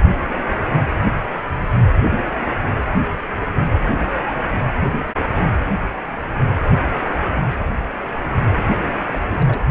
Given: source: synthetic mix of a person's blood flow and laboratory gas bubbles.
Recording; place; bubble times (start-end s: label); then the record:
Doppler ultrasound of blood flow; precordium
8.85-8.96 s: bubbles
9.08-9.61 s: bubbles
From the record:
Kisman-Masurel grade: 211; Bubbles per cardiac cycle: several, 3 to 8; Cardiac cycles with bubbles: 1 to 10%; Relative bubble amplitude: barely perceptible (0.100 to 0.250); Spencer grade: 1 (occasional bubble signal discernible with the cardiac motion signal, with majority of cardiac periods free of bubbles); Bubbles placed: anywhere in the cardiac cycle